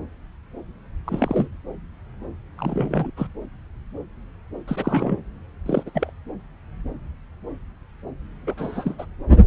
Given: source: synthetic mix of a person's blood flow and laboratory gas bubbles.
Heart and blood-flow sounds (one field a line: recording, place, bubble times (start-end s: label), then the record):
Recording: Doppler ultrasound of blood flow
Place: subclavian vein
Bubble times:
1.06-1.48 s: bubbles
2.58-3.11 s: bubbles
3.17-3.27 s: bubbles
4.68-5.20 s: bubbles
5.66-5.83 s: bubbles
5.86-5.90 s: bubbles
5.94-6.11 s: bubbles
8.46-8.95 s: bubbles
8.98-9.05 s: bubbles
From the record:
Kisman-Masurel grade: 222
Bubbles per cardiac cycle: several, 3 to 8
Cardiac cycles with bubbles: 10 to 50%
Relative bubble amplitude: moderate (0.250 to 0.450)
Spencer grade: 2 (many but less than half of the cardiac periods contain bubble signals, singularly or in groups)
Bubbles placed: anywhere in the cardiac cycle